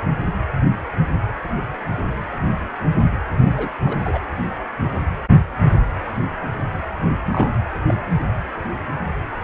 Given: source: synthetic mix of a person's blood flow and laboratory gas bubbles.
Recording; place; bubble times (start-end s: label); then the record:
Doppler ultrasound of blood flow; precordium
3.45-3.71 s: bubbles
3.84-3.98 s: bubbles
4.04-4.21 s: bubbles
7.31-7.60 s: bubbles
7.88-7.95 s: bubbles
From the record:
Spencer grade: 2 (many but less than half of the cardiac periods contain bubble signals, singularly or in groups); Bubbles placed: anywhere in the cardiac cycle